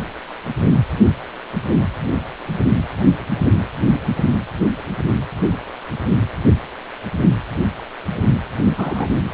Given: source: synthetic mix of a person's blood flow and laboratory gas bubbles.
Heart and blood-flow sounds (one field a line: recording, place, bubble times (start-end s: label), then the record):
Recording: Doppler ultrasound of blood flow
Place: precordium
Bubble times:
8.76-9.07 s: bubbles
From the record:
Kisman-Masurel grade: 112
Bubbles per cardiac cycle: 1 to 2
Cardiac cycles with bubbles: 1 to 10%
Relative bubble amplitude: moderate (0.250 to 0.450)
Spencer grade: 1 (occasional bubble signal discernible with the cardiac motion signal, with majority of cardiac periods free of bubbles)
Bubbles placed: only in the low amplitude regions of the cardiac cycle